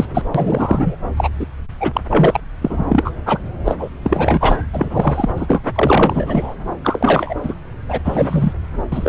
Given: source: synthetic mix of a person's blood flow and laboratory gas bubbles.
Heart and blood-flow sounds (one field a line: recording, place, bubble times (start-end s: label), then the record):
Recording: Doppler ultrasound of blood flow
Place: subclavian vein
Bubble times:
0.00-0.08 s: bubbles
0.13-0.22 s: bubbles
0.35-0.96 s: bubbles
1.17-1.29 s: bubbles
1.40-1.46 s: bubbles
1.80-2.01 s: bubbles
2.10-2.40 s: bubbles
2.62-3.12 s: bubbles
3.25-3.39 s: bubbles
3.65-3.73 s: bubbles
3.78-3.89 s: bubbles
4.03-4.57 s: bubbles
4.71-5.29 s: bubbles
5.36-5.62 s: bubbles
5.75-6.55 s: bubbles
6.83-7.35 s: bubbles
7.42-7.54 s: bubbles
7.88-8.00 s: bubbles
8.04-8.53 s: bubbles
8.92-9.09 s: bubbles
From the record:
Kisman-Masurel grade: 343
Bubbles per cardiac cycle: rolling drumbeat, 9 or more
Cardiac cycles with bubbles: 100%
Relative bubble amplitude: loud (0.450 to 0.775)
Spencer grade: 3 (all of the cardiac periods contain showers or single bubble signals, but not dominating or overriding the cardiac motion signals)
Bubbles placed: anywhere in the cardiac cycle